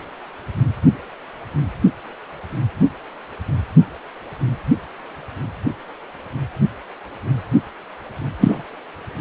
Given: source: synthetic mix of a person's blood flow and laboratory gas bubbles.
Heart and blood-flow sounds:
Doppler ultrasound of blood flow; precordium
8.40-8.63 s: bubbles
From the record:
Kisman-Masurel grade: 123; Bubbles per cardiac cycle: 1 to 2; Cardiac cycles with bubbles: 10 to 50%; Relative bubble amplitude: loud (0.450 to 0.775); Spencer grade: 2 (many but less than half of the cardiac periods contain bubble signals, singularly or in groups); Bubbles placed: anywhere in the cardiac cycle

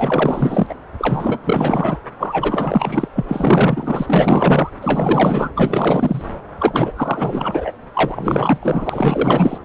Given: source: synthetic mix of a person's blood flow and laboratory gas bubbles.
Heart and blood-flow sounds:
Doppler ultrasound of blood flow; subclavian vein
0.00-0.67 s: bubbles
0.69-0.74 s: bubbles
0.98-1.38 s: bubbles
1.44-1.98 s: bubbles
2.19-3.08 s: bubbles
3.15-3.24 s: bubbles
3.28-4.70 s: bubbles
4.82-5.50 s: bubbles
5.56-6.23 s: bubbles
6.59-6.93 s: bubbles
6.96-7.72 s: bubbles
7.95-8.58 s: bubbles
8.62-9.58 s: bubbles
From the record:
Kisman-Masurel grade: 444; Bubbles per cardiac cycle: continuous sound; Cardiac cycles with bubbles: 100%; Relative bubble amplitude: maximal (0.775 to 0.999); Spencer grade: 4 (maximum detectable bubble signal sounding continuously throughout systole and diastole of every cardiac period, and overriding the amplitude of the normal cardiac signals); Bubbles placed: anywhere in the cardiac cycle

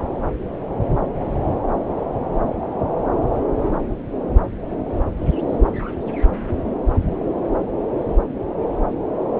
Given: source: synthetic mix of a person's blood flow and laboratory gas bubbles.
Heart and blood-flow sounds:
Doppler ultrasound of blood flow; subclavian vein
no bubbles
From the record:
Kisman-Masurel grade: 000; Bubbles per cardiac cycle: 0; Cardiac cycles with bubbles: 0%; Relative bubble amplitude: no bubbles discernible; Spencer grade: 0 (complete lack of bubble signals)

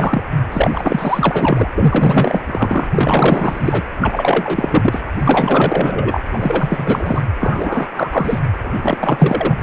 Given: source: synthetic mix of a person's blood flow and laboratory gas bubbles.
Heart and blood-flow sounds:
Doppler ultrasound of blood flow; precordium
0.00-0.23 s: bubbles
0.52-1.70 s: bubbles
1.77-2.42 s: bubbles
2.46-2.88 s: bubbles
2.92-3.82 s: bubbles
4.01-5.03 s: bubbles
5.19-6.23 s: bubbles
6.31-7.23 s: bubbles
7.40-7.88 s: bubbles
7.95-8.41 s: bubbles
8.65-8.98 s: bubbles
9.00-9.63 s: bubbles
From the record:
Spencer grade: 4 (maximum detectable bubble signal sounding continuously throughout systole and diastole of every cardiac period, and overriding the amplitude of the normal cardiac signals); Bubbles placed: anywhere in the cardiac cycle

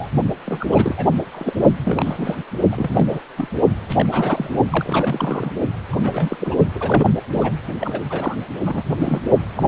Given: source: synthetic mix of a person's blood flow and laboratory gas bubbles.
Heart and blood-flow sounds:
Doppler ultrasound of blood flow; precordium
0.00-0.07 s: bubbles
0.45-0.67 s: bubbles
0.72-1.05 s: bubbles
1.31-1.53 s: bubbles
1.84-2.39 s: bubbles
2.72-3.22 s: bubbles
3.37-3.49 s: bubbles
3.89-4.06 s: bubbles
4.11-4.57 s: bubbles
4.72-5.51 s: bubbles
5.92-5.96 s: bubbles
6.01-6.37 s: bubbles
6.40-6.55 s: bubbles
6.75-7.12 s: bubbles
7.32-7.51 s: bubbles
7.79-8.02 s: bubbles
8.10-8.36 s: bubbles
8.66-8.83 s: bubbles
8.98-9.21 s: bubbles
9.55-9.63 s: bubbles
From the record:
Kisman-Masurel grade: 342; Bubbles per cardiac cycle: rolling drumbeat, 9 or more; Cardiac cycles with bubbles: 100%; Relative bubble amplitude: moderate (0.250 to 0.450); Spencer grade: 3 (all of the cardiac periods contain showers or single bubble signals, but not dominating or overriding the cardiac motion signals); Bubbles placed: only in the low amplitude regions of the cardiac cycle

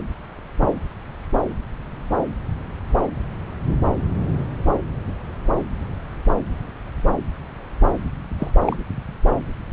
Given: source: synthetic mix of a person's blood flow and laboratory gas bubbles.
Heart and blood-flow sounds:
Doppler ultrasound of blood flow; subclavian vein
8.38-8.51 s: bubbles
8.65-8.77 s: bubbles
From the record:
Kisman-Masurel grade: 112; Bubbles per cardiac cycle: 1 to 2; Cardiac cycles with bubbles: 1 to 10%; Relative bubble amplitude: moderate (0.250 to 0.450); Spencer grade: 1 (occasional bubble signal discernible with the cardiac motion signal, with majority of cardiac periods free of bubbles); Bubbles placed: anywhere in the cardiac cycle

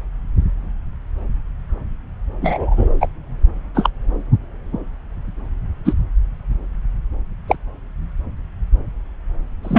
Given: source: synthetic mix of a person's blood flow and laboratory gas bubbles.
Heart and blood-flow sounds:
Doppler ultrasound of blood flow; subclavian vein
2.42-2.89 s: bubbles
3.01-3.08 s: bubbles
3.74-3.90 s: bubbles
5.85-5.94 s: bubbles
7.47-7.56 s: bubbles
9.63-9.79 s: bubbles
From the record:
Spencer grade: 2 (many but less than half of the cardiac periods contain bubble signals, singularly or in groups); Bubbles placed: anywhere in the cardiac cycle

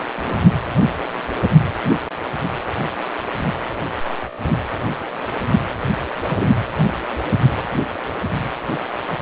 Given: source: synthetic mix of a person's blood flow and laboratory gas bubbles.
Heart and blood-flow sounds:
Doppler ultrasound of blood flow; precordium
0.15-0.39 s: bubbles
6.29-6.52 s: bubbles
7.70-7.77 s: bubbles
9.07-9.15 s: bubbles
From the record:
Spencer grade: 2 (many but less than half of the cardiac periods contain bubble signals, singularly or in groups); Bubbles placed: anywhere in the cardiac cycle

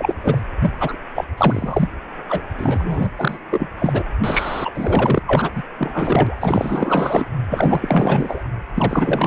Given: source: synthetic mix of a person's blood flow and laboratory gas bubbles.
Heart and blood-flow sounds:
Doppler ultrasound of blood flow; precordium
0.00-0.15 s: bubbles
0.21-0.43 s: bubbles
0.61-0.73 s: bubbles
0.79-0.97 s: bubbles
1.15-1.25 s: bubbles
1.37-1.89 s: bubbles
2.29-2.42 s: bubbles
2.57-3.10 s: bubbles
3.17-3.38 s: bubbles
3.50-3.68 s: bubbles
3.79-4.04 s: bubbles
4.23-4.71 s: bubbles
4.74-5.20 s: bubbles
5.26-5.51 s: bubbles
5.55-5.63 s: bubbles
5.78-6.35 s: bubbles
6.38-7.27 s: bubbles
7.49-8.41 s: bubbles
8.75-9.27 s: bubbles
From the record:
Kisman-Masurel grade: 444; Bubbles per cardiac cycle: continuous sound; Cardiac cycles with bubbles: 100%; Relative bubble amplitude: maximal (0.775 to 0.999); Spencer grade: 4 (maximum detectable bubble signal sounding continuously throughout systole and diastole of every cardiac period, and overriding the amplitude of the normal cardiac signals); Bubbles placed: anywhere in the cardiac cycle

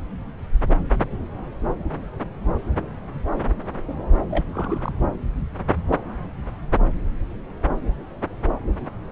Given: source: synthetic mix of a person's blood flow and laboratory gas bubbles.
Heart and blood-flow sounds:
Doppler ultrasound of blood flow; subclavian vein
4.30-4.45 s: bubbles
4.51-4.92 s: bubbles
From the record:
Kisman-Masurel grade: 211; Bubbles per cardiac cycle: several, 3 to 8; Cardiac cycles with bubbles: 1 to 10%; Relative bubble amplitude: barely perceptible (0.100 to 0.250); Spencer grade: 1 (occasional bubble signal discernible with the cardiac motion signal, with majority of cardiac periods free of bubbles); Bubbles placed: anywhere in the cardiac cycle

